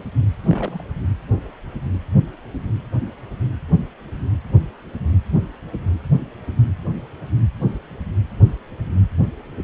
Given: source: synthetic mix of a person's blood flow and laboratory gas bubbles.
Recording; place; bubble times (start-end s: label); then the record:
Doppler ultrasound of blood flow; precordium
0.39-0.83 s: bubbles
From the record:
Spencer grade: 1 (occasional bubble signal discernible with the cardiac motion signal, with majority of cardiac periods free of bubbles); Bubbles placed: anywhere in the cardiac cycle